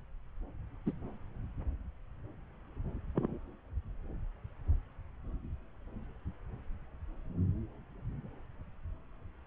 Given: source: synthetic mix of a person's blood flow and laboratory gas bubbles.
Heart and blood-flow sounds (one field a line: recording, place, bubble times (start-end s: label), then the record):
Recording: Doppler ultrasound of blood flow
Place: subclavian vein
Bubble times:
0.86-0.92 s: bubbles
3.15-3.38 s: bubbles
From the record:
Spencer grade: 2 (many but less than half of the cardiac periods contain bubble signals, singularly or in groups)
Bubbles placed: anywhere in the cardiac cycle